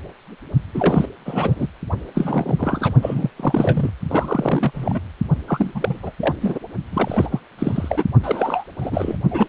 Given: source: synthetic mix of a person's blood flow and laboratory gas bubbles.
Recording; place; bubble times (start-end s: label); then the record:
Doppler ultrasound of blood flow; precordium
0.74-1.08 s: bubbles
1.25-1.67 s: bubbles
2.14-2.93 s: bubbles
3.02-3.31 s: bubbles
3.36-3.90 s: bubbles
4.09-4.71 s: bubbles
4.74-5.00 s: bubbles
5.47-5.72 s: bubbles
5.75-5.97 s: bubbles
6.03-6.12 s: bubbles
6.20-6.35 s: bubbles
6.41-6.59 s: bubbles
6.91-7.40 s: bubbles
7.58-8.04 s: bubbles
8.23-8.64 s: bubbles
8.78-9.17 s: bubbles
9.31-9.47 s: bubbles
From the record:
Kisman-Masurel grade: 332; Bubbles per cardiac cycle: rolling drumbeat, 9 or more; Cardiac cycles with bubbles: 50 to 99%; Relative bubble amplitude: moderate (0.250 to 0.450); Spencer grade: 3 (all of the cardiac periods contain showers or single bubble signals, but not dominating or overriding the cardiac motion signals); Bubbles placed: only in the low amplitude regions of the cardiac cycle